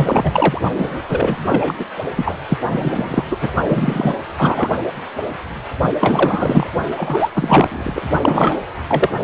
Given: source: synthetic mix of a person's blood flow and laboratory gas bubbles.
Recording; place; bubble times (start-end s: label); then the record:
Doppler ultrasound of blood flow; precordium
0.00-0.61 s: bubbles
0.72-1.02 s: bubbles
1.08-1.75 s: bubbles
1.79-1.85 s: bubbles
2.15-2.36 s: bubbles
2.48-2.58 s: bubbles
2.69-3.24 s: bubbles
3.31-3.36 s: bubbles
3.41-3.49 s: bubbles
3.65-4.16 s: bubbles
4.36-4.70 s: bubbles
6.00-6.67 s: bubbles
6.96-7.29 s: bubbles
7.34-8.01 s: bubbles
8.21-8.59 s: bubbles
8.88-9.10 s: bubbles
From the record:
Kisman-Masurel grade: 333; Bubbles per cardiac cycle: rolling drumbeat, 9 or more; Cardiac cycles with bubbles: 50 to 99%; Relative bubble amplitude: loud (0.450 to 0.775); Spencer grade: 3 (all of the cardiac periods contain showers or single bubble signals, but not dominating or overriding the cardiac motion signals); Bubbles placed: only in the low amplitude regions of the cardiac cycle